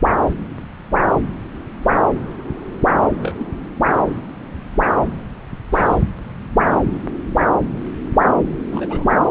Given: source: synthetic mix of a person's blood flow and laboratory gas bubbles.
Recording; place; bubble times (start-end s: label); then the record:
Doppler ultrasound of blood flow; subclavian vein
3.19-3.46 s: bubbles
5.72-5.97 s: bubbles
8.72-9.06 s: bubbles
From the record:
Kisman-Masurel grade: 121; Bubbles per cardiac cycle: 1 to 2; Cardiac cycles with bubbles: 10 to 50%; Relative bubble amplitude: barely perceptible (0.100 to 0.250); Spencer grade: 2 (many but less than half of the cardiac periods contain bubble signals, singularly or in groups); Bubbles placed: anywhere in the cardiac cycle